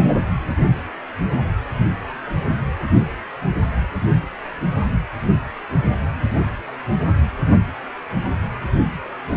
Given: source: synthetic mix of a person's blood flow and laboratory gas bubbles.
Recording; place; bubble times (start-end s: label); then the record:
Doppler ultrasound of blood flow; precordium
0.00-0.13 s: bubbles
From the record:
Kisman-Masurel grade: 223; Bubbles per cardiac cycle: several, 3 to 8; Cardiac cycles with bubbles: 10 to 50%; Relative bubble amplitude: loud (0.450 to 0.775); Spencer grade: 2 (many but less than half of the cardiac periods contain bubble signals, singularly or in groups); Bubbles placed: anywhere in the cardiac cycle